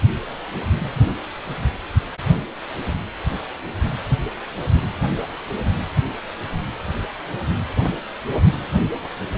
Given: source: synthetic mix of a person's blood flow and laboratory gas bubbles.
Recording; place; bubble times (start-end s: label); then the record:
Doppler ultrasound of blood flow; precordium
no bubbles
From the record:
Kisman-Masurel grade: 000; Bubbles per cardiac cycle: 0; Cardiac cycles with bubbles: 0%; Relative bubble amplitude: no bubbles discernible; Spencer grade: 0 (complete lack of bubble signals)